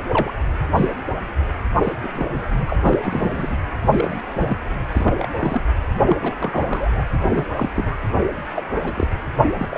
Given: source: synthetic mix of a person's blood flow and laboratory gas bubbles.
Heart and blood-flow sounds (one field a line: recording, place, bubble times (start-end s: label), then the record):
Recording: Doppler ultrasound of blood flow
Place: precordium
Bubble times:
0.09-0.32 s: bubbles
0.74-0.89 s: bubbles
1.83-1.93 s: bubbles
2.03-2.76 s: bubbles
2.80-2.98 s: bubbles
3.05-3.56 s: bubbles
3.92-4.22 s: bubbles
4.35-4.58 s: bubbles
4.92-5.27 s: bubbles
5.40-5.62 s: bubbles
6.04-6.17 s: bubbles
6.21-6.32 s: bubbles
6.38-7.04 s: bubbles
7.12-7.19 s: bubbles
7.29-7.46 s: bubbles
7.56-7.70 s: bubbles
7.75-7.95 s: bubbles
8.55-8.65 s: bubbles
8.84-9.08 s: bubbles
9.58-9.78 s: bubbles
From the record:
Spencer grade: 3 (all of the cardiac periods contain showers or single bubble signals, but not dominating or overriding the cardiac motion signals)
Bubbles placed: anywhere in the cardiac cycle